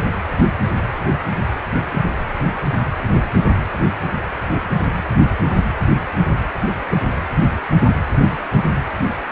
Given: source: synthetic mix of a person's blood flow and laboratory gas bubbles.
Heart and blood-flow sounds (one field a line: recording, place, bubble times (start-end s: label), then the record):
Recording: Doppler ultrasound of blood flow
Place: precordium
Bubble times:
0.00-0.05 s: bubbles
6.91-6.96 s: bubbles
From the record:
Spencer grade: 2 (many but less than half of the cardiac periods contain bubble signals, singularly or in groups)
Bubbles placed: anywhere in the cardiac cycle